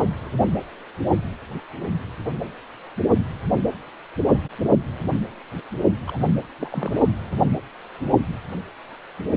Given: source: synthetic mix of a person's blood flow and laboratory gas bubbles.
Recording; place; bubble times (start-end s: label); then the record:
Doppler ultrasound of blood flow; precordium
6.07-6.19 s: bubbles
6.58-6.70 s: bubbles
6.72-7.08 s: bubbles
From the record:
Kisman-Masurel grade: 211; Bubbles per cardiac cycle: several, 3 to 8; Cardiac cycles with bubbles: 1 to 10%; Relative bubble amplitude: barely perceptible (0.100 to 0.250); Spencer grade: 1 (occasional bubble signal discernible with the cardiac motion signal, with majority of cardiac periods free of bubbles); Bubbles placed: anywhere in the cardiac cycle